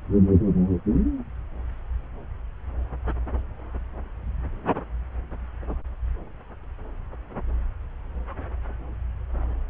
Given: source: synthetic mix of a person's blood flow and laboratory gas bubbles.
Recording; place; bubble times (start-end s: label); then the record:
Doppler ultrasound of blood flow; subclavian vein
no bubbles
From the record:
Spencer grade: 0 (complete lack of bubble signals)